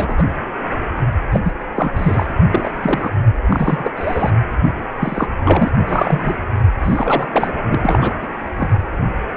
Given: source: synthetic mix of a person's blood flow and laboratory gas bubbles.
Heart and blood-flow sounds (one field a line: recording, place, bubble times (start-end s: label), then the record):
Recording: Doppler ultrasound of blood flow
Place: precordium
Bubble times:
0.00-0.26 s: bubbles
1.31-1.40 s: bubbles
1.44-1.54 s: bubbles
1.75-1.91 s: bubbles
1.95-2.32 s: bubbles
2.50-2.78 s: bubbles
2.83-3.10 s: bubbles
3.49-3.91 s: bubbles
3.96-4.30 s: bubbles
5.00-5.27 s: bubbles
5.45-5.69 s: bubbles
5.87-6.35 s: bubbles
6.84-7.52 s: bubbles
7.69-8.15 s: bubbles
8.21-8.27 s: bubbles
8.58-8.73 s: bubbles
From the record:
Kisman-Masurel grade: 232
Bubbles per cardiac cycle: several, 3 to 8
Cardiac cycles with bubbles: 50 to 99%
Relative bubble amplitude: moderate (0.250 to 0.450)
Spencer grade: 3 (all of the cardiac periods contain showers or single bubble signals, but not dominating or overriding the cardiac motion signals)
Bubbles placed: anywhere in the cardiac cycle